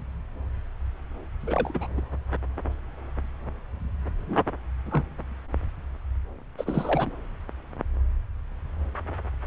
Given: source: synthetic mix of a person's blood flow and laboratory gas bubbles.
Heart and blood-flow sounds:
Doppler ultrasound of blood flow; subclavian vein
1.40-1.87 s: bubbles
1.97-2.01 s: bubbles
4.27-4.36 s: bubbles
4.86-5.03 s: bubbles
6.58-7.10 s: bubbles
From the record:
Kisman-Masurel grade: 221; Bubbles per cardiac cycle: several, 3 to 8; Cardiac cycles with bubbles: 10 to 50%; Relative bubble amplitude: barely perceptible (0.100 to 0.250); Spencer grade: 2 (many but less than half of the cardiac periods contain bubble signals, singularly or in groups); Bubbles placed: anywhere in the cardiac cycle

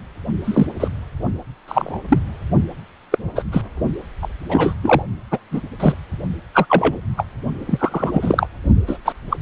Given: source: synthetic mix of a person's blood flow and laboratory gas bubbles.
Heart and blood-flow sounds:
Doppler ultrasound of blood flow; precordium
0.44-0.67 s: bubbles
0.79-0.88 s: bubbles
1.67-1.98 s: bubbles
2.08-2.19 s: bubbles
3.12-3.18 s: bubbles
3.35-3.43 s: bubbles
3.52-3.62 s: bubbles
4.21-4.28 s: bubbles
4.49-4.73 s: bubbles
4.82-5.03 s: bubbles
5.30-5.38 s: bubbles
5.51-5.61 s: bubbles
5.79-5.94 s: bubbles
6.54-6.66 s: bubbles
6.69-6.96 s: bubbles
7.17-7.24 s: bubbles
7.66-8.47 s: bubbles
8.87-8.98 s: bubbles
9.04-9.12 s: bubbles
9.30-9.37 s: bubbles
From the record:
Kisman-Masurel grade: 243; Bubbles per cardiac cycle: several, 3 to 8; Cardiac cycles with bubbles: 100%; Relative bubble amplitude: loud (0.450 to 0.775); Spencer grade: 3 (all of the cardiac periods contain showers or single bubble signals, but not dominating or overriding the cardiac motion signals); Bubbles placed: only in the low amplitude regions of the cardiac cycle

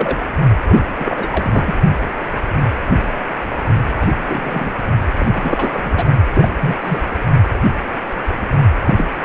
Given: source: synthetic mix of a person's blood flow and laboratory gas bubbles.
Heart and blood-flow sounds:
Doppler ultrasound of blood flow; precordium
0.00-0.17 s: bubbles
0.63-0.86 s: bubbles
0.99-1.28 s: bubbles
1.31-1.74 s: bubbles
4.00-4.11 s: bubbles
4.29-4.74 s: bubbles
5.17-6.04 s: bubbles
6.33-6.49 s: bubbles
6.61-6.75 s: bubbles
6.81-7.02 s: bubbles
8.86-8.95 s: bubbles
8.97-9.04 s: bubbles
9.23-9.25 s: bubbles
From the record:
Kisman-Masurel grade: 232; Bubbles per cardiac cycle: several, 3 to 8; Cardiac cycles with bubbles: 50 to 99%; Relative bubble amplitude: moderate (0.250 to 0.450); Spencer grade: 3 (all of the cardiac periods contain showers or single bubble signals, but not dominating or overriding the cardiac motion signals); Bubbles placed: only in the low amplitude regions of the cardiac cycle

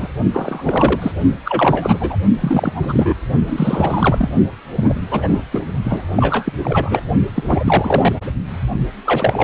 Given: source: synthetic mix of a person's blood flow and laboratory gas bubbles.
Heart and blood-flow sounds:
Doppler ultrasound of blood flow; precordium
0.00-0.07 s: bubbles
0.33-1.11 s: bubbles
1.45-2.17 s: bubbles
2.41-3.15 s: bubbles
3.46-4.29 s: bubbles
4.76-5.42 s: bubbles
5.51-5.61 s: bubbles
5.84-6.03 s: bubbles
6.15-6.53 s: bubbles
6.64-7.01 s: bubbles
7.34-7.44 s: bubbles
7.46-8.12 s: bubbles
9.05-9.44 s: bubbles
From the record:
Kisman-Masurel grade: 333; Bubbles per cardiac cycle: rolling drumbeat, 9 or more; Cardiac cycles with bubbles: 50 to 99%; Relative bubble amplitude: loud (0.450 to 0.775); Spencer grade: 3 (all of the cardiac periods contain showers or single bubble signals, but not dominating or overriding the cardiac motion signals); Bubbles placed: only in the low amplitude regions of the cardiac cycle

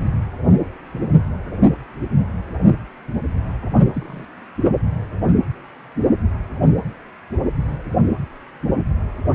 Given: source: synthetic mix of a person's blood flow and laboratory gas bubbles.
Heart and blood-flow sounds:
Doppler ultrasound of blood flow; precordium
3.93-4.25 s: bubbles
From the record:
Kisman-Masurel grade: 111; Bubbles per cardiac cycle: 1 to 2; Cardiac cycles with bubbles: 1 to 10%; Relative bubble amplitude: barely perceptible (0.100 to 0.250); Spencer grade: 1 (occasional bubble signal discernible with the cardiac motion signal, with majority of cardiac periods free of bubbles); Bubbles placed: anywhere in the cardiac cycle

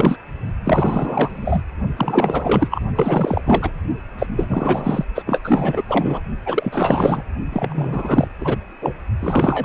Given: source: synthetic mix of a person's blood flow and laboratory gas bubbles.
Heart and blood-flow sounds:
Doppler ultrasound of blood flow; precordium
0.00-0.19 s: bubbles
0.65-1.62 s: bubbles
1.97-2.68 s: bubbles
2.71-2.82 s: bubbles
2.95-3.42 s: bubbles
3.46-3.72 s: bubbles
4.18-4.27 s: bubbles
4.37-5.05 s: bubbles
5.15-5.22 s: bubbles
5.27-5.41 s: bubbles
5.44-5.83 s: bubbles
5.88-6.21 s: bubbles
6.46-7.23 s: bubbles
7.52-8.28 s: bubbles
8.40-8.56 s: bubbles
8.81-8.94 s: bubbles
9.21-9.65 s: bubbles
From the record:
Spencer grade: 4 (maximum detectable bubble signal sounding continuously throughout systole and diastole of every cardiac period, and overriding the amplitude of the normal cardiac signals); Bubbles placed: only in the low amplitude regions of the cardiac cycle

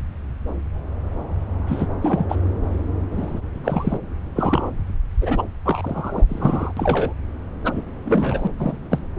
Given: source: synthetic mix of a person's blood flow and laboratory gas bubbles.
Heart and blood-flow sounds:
Doppler ultrasound of blood flow; subclavian vein
1.67-1.86 s: bubbles
2.01-2.26 s: bubbles
2.29-2.36 s: bubbles
3.11-3.42 s: bubbles
3.63-3.97 s: bubbles
4.33-4.70 s: bubbles
5.21-5.42 s: bubbles
5.65-6.25 s: bubbles
6.29-6.72 s: bubbles
6.76-7.13 s: bubbles
7.64-7.83 s: bubbles
8.05-8.47 s: bubbles
8.58-8.77 s: bubbles
8.91-8.98 s: bubbles
From the record:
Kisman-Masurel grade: 232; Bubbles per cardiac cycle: several, 3 to 8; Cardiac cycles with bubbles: 50 to 99%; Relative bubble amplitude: moderate (0.250 to 0.450); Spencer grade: 3 (all of the cardiac periods contain showers or single bubble signals, but not dominating or overriding the cardiac motion signals); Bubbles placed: anywhere in the cardiac cycle

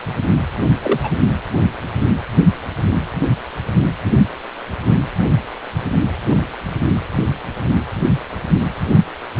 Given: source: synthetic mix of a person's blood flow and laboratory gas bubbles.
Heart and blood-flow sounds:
Doppler ultrasound of blood flow; precordium
0.82-1.00 s: bubbles
1.03-1.12 s: bubbles
From the record:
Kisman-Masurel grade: 123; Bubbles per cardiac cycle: 1 to 2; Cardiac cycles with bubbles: 10 to 50%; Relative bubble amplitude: loud (0.450 to 0.775); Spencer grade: 2 (many but less than half of the cardiac periods contain bubble signals, singularly or in groups); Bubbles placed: anywhere in the cardiac cycle

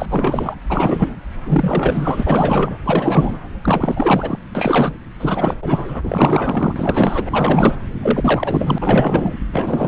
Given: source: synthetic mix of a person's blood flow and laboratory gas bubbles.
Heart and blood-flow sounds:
Doppler ultrasound of blood flow; subclavian vein
0.00-0.06 s: bubbles
0.09-0.55 s: bubbles
0.70-1.17 s: bubbles
1.45-2.77 s: bubbles
2.84-3.39 s: bubbles
3.61-4.39 s: bubbles
4.55-4.93 s: bubbles
5.20-5.55 s: bubbles
5.62-6.00 s: bubbles
6.03-7.77 s: bubbles
8.01-9.34 s: bubbles
9.53-9.88 s: bubbles
From the record:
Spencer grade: 4 (maximum detectable bubble signal sounding continuously throughout systole and diastole of every cardiac period, and overriding the amplitude of the normal cardiac signals); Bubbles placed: anywhere in the cardiac cycle

